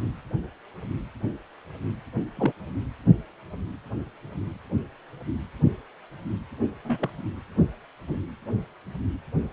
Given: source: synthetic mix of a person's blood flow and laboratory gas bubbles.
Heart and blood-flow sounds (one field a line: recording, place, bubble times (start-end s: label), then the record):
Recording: Doppler ultrasound of blood flow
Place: precordium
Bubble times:
2.36-2.52 s: bubbles
6.84-7.09 s: bubbles
8.08-8.20 s: bubbles
From the record:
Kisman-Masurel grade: 121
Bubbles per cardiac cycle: 1 to 2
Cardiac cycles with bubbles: 10 to 50%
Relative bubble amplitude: barely perceptible (0.100 to 0.250)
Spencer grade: 2 (many but less than half of the cardiac periods contain bubble signals, singularly or in groups)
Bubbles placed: anywhere in the cardiac cycle